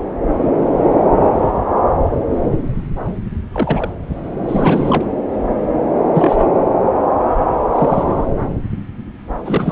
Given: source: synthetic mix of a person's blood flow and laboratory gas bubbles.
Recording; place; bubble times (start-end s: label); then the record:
Doppler ultrasound of blood flow; subclavian vein
3.52-3.91 s: bubbles
4.48-5.05 s: bubbles
6.14-6.46 s: bubbles
7.73-8.28 s: bubbles
9.45-9.72 s: bubbles
From the record:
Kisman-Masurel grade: 223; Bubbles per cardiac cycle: several, 3 to 8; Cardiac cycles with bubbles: 10 to 50%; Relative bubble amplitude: loud (0.450 to 0.775); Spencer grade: 2 (many but less than half of the cardiac periods contain bubble signals, singularly or in groups); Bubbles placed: anywhere in the cardiac cycle